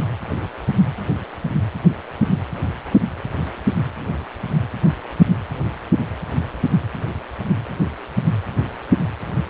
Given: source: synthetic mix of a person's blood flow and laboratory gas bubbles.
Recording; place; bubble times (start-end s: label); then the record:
Doppler ultrasound of blood flow; precordium
no bubbles
From the record:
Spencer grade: 0 (complete lack of bubble signals)